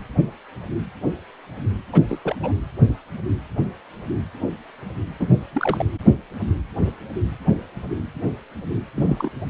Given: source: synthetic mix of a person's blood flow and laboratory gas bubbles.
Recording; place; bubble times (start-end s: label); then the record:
Doppler ultrasound of blood flow; precordium
1.92-2.02 s: bubbles
2.08-2.19 s: bubbles
2.23-2.35 s: bubbles
2.42-2.52 s: bubbles
5.20-5.30 s: bubbles
5.53-5.86 s: bubbles
8.95-9.30 s: bubbles
From the record:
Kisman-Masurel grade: 221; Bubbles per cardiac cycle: several, 3 to 8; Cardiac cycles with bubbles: 10 to 50%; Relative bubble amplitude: barely perceptible (0.100 to 0.250); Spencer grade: 2 (many but less than half of the cardiac periods contain bubble signals, singularly or in groups); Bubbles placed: anywhere in the cardiac cycle